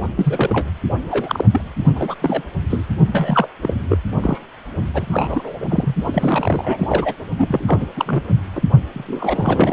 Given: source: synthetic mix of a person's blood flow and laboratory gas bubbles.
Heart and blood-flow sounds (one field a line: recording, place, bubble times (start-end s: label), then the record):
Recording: Doppler ultrasound of blood flow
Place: precordium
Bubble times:
0.17-0.70 s: bubbles
1.10-1.45 s: bubbles
1.51-1.61 s: bubbles
1.76-1.92 s: bubbles
1.95-2.14 s: bubbles
2.21-2.43 s: bubbles
2.70-2.86 s: bubbles
3.07-3.47 s: bubbles
3.62-3.77 s: bubbles
3.88-3.98 s: bubbles
4.22-4.39 s: bubbles
4.93-5.54 s: bubbles
5.60-5.67 s: bubbles
5.69-5.96 s: bubbles
6.03-7.13 s: bubbles
7.38-7.89 s: bubbles
7.96-8.22 s: bubbles
8.55-8.62 s: bubbles
8.93-9.73 s: bubbles
From the record:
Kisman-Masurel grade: 342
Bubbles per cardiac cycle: rolling drumbeat, 9 or more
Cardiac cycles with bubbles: 100%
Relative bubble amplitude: moderate (0.250 to 0.450)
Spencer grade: 3 (all of the cardiac periods contain showers or single bubble signals, but not dominating or overriding the cardiac motion signals)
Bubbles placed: only in the low amplitude regions of the cardiac cycle